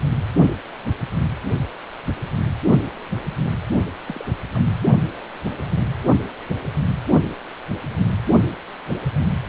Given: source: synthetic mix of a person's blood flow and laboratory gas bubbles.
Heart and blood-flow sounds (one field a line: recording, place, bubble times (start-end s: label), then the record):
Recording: Doppler ultrasound of blood flow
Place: precordium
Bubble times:
4.07-4.25 s: bubbles
4.50-4.68 s: bubbles
From the record:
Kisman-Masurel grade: 211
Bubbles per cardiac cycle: several, 3 to 8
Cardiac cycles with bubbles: 1 to 10%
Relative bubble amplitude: barely perceptible (0.100 to 0.250)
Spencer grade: 1 (occasional bubble signal discernible with the cardiac motion signal, with majority of cardiac periods free of bubbles)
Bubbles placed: anywhere in the cardiac cycle